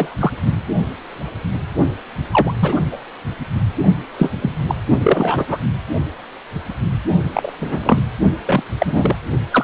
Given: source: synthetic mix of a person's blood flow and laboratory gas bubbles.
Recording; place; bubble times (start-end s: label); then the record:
Doppler ultrasound of blood flow; precordium
0.00-0.16 s: bubbles
0.20-0.32 s: bubbles
2.31-2.52 s: bubbles
2.60-2.81 s: bubbles
2.92-2.98 s: bubbles
4.17-4.29 s: bubbles
4.42-4.51 s: bubbles
4.67-4.75 s: bubbles
5.00-5.58 s: bubbles
7.33-7.53 s: bubbles
7.59-8.03 s: bubbles
8.46-8.62 s: bubbles
8.78-9.15 s: bubbles
9.51-9.64 s: bubbles
From the record:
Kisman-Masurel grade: 233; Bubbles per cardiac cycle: several, 3 to 8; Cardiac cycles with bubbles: 50 to 99%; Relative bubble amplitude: loud (0.450 to 0.775); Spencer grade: 3 (all of the cardiac periods contain showers or single bubble signals, but not dominating or overriding the cardiac motion signals); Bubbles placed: only in the low amplitude regions of the cardiac cycle